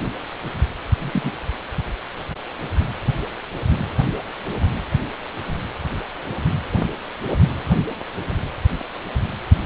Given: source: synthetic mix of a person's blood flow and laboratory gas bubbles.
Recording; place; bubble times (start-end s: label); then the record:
Doppler ultrasound of blood flow; precordium
0.99-1.31 s: bubbles
From the record:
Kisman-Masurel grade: 112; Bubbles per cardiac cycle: 1 to 2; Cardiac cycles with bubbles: 1 to 10%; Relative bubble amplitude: moderate (0.250 to 0.450); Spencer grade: 1 (occasional bubble signal discernible with the cardiac motion signal, with majority of cardiac periods free of bubbles); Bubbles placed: anywhere in the cardiac cycle